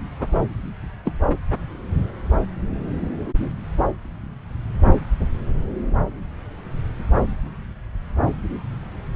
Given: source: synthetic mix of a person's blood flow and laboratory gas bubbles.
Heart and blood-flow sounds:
Doppler ultrasound of blood flow; subclavian vein
1.05-1.12 s: bubbles
1.29-1.36 s: bubbles
From the record:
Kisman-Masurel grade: 112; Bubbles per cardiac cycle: 1 to 2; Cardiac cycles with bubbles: 1 to 10%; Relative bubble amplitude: moderate (0.250 to 0.450); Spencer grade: 1 (occasional bubble signal discernible with the cardiac motion signal, with majority of cardiac periods free of bubbles); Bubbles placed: anywhere in the cardiac cycle

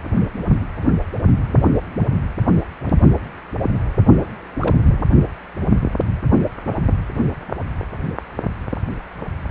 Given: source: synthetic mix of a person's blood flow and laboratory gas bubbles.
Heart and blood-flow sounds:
Doppler ultrasound of blood flow; precordium
4.56-4.74 s: bubbles
4.86-5.05 s: bubbles
From the record:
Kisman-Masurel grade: 212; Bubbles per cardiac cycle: several, 3 to 8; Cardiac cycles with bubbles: 1 to 10%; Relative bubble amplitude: moderate (0.250 to 0.450); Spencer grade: 1 (occasional bubble signal discernible with the cardiac motion signal, with majority of cardiac periods free of bubbles); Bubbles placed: only in the low amplitude regions of the cardiac cycle

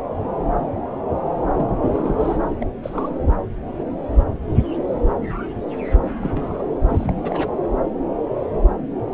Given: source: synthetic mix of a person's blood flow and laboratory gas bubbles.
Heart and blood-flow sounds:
Doppler ultrasound of blood flow; subclavian vein
1.54-1.66 s: bubbles
1.82-2.38 s: bubbles
2.59-2.67 s: bubbles
2.83-3.10 s: bubbles
6.01-6.07 s: bubbles
6.21-6.62 s: bubbles
6.89-7.13 s: bubbles
7.16-7.48 s: bubbles
From the record:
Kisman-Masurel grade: 221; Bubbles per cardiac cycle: several, 3 to 8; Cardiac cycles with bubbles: 10 to 50%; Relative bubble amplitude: barely perceptible (0.100 to 0.250); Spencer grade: 2 (many but less than half of the cardiac periods contain bubble signals, singularly or in groups); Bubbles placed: anywhere in the cardiac cycle

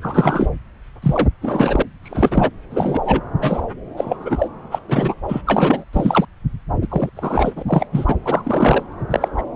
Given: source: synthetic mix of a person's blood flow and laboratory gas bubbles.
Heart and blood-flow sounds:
Doppler ultrasound of blood flow; subclavian vein
0.01-0.47 s: bubbles
1.02-1.28 s: bubbles
1.41-1.82 s: bubbles
2.03-2.49 s: bubbles
2.70-3.21 s: bubbles
3.40-3.65 s: bubbles
3.97-4.48 s: bubbles
4.71-4.79 s: bubbles
4.88-5.15 s: bubbles
5.29-5.42 s: bubbles
5.46-5.84 s: bubbles
5.92-6.25 s: bubbles
6.81-6.87 s: bubbles
6.89-7.09 s: bubbles
7.15-7.62 s: bubbles
7.66-7.86 s: bubbles
7.92-8.15 s: bubbles
8.25-8.83 s: bubbles
9.11-9.28 s: bubbles
9.38-9.43 s: bubbles
From the record:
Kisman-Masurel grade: 243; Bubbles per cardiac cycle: several, 3 to 8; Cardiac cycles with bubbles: 100%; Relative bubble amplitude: loud (0.450 to 0.775); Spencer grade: 3 (all of the cardiac periods contain showers or single bubble signals, but not dominating or overriding the cardiac motion signals); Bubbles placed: anywhere in the cardiac cycle

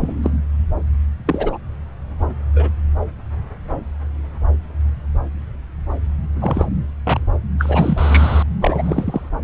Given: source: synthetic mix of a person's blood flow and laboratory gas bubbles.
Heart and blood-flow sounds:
Doppler ultrasound of blood flow; subclavian vein
0.01-0.13 s: bubbles
0.22-0.30 s: bubbles
1.27-1.58 s: bubbles
2.56-2.69 s: bubbles
6.41-6.67 s: bubbles
7.04-7.20 s: bubbles
7.58-8.43 s: bubbles
8.61-9.30 s: bubbles
From the record:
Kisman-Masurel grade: 232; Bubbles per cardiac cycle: several, 3 to 8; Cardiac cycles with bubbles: 50 to 99%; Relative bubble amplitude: moderate (0.250 to 0.450); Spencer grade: 3 (all of the cardiac periods contain showers or single bubble signals, but not dominating or overriding the cardiac motion signals); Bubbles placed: anywhere in the cardiac cycle

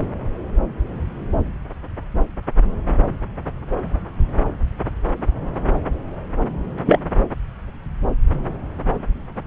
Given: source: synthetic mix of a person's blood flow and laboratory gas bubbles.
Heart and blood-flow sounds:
Doppler ultrasound of blood flow; subclavian vein
6.86-7.00 s: bubbles
From the record:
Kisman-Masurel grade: 113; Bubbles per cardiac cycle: 1 to 2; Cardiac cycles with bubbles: 1 to 10%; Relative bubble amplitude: loud (0.450 to 0.775); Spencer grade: 1 (occasional bubble signal discernible with the cardiac motion signal, with majority of cardiac periods free of bubbles); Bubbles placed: anywhere in the cardiac cycle

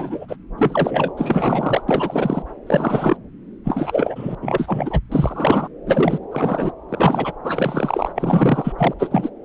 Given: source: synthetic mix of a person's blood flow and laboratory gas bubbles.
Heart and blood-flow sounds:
Doppler ultrasound of blood flow; subclavian vein
0.00-0.36 s: bubbles
0.57-1.13 s: bubbles
1.17-1.82 s: bubbles
1.88-2.42 s: bubbles
2.67-3.17 s: bubbles
3.64-4.35 s: bubbles
4.42-4.99 s: bubbles
5.12-5.68 s: bubbles
5.86-6.19 s: bubbles
6.31-6.72 s: bubbles
6.89-7.33 s: bubbles
7.44-8.12 s: bubbles
8.15-8.73 s: bubbles
8.78-8.94 s: bubbles
8.99-9.29 s: bubbles
From the record:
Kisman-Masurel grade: 343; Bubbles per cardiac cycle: rolling drumbeat, 9 or more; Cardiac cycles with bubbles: 100%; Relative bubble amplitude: loud (0.450 to 0.775); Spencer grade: 3 (all of the cardiac periods contain showers or single bubble signals, but not dominating or overriding the cardiac motion signals); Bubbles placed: anywhere in the cardiac cycle

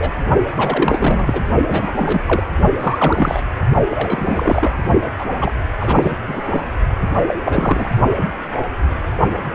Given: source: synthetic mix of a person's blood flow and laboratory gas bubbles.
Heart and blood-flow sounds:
Doppler ultrasound of blood flow; precordium
0.00-0.12 s: bubbles
0.54-1.41 s: bubbles
1.70-2.22 s: bubbles
2.27-2.45 s: bubbles
2.77-3.41 s: bubbles
3.90-4.76 s: bubbles
5.18-5.25 s: bubbles
5.40-5.52 s: bubbles
5.80-6.11 s: bubbles
6.26-6.42 s: bubbles
6.51-6.62 s: bubbles
7.27-7.34 s: bubbles
7.45-7.88 s: bubbles
From the record:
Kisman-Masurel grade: 332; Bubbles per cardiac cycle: rolling drumbeat, 9 or more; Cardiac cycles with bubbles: 50 to 99%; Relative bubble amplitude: moderate (0.250 to 0.450); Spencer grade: 3 (all of the cardiac periods contain showers or single bubble signals, but not dominating or overriding the cardiac motion signals); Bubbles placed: only in the low amplitude regions of the cardiac cycle

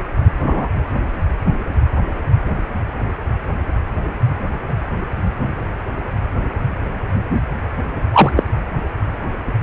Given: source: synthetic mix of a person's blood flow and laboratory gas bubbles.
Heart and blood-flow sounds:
Doppler ultrasound of blood flow; precordium
0.43-0.67 s: bubbles
8.12-8.32 s: bubbles
8.36-8.43 s: bubbles
From the record:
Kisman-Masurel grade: 113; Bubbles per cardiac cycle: 1 to 2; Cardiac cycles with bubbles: 1 to 10%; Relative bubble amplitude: loud (0.450 to 0.775); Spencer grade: 1 (occasional bubble signal discernible with the cardiac motion signal, with majority of cardiac periods free of bubbles); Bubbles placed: anywhere in the cardiac cycle

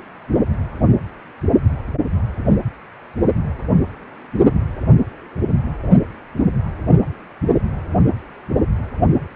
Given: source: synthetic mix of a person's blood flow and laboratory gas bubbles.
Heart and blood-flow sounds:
Doppler ultrasound of blood flow; precordium
no bubbles
From the record:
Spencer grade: 0 (complete lack of bubble signals)

